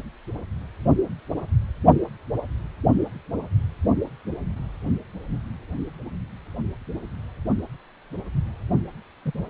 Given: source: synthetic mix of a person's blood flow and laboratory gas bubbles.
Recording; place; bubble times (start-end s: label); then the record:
Doppler ultrasound of blood flow; precordium
9.25-9.31 s: bubbles
From the record:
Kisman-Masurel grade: 111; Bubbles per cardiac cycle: 1 to 2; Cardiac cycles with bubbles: 1 to 10%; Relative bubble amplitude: barely perceptible (0.100 to 0.250); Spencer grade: 1 (occasional bubble signal discernible with the cardiac motion signal, with majority of cardiac periods free of bubbles); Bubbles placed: only in the low amplitude regions of the cardiac cycle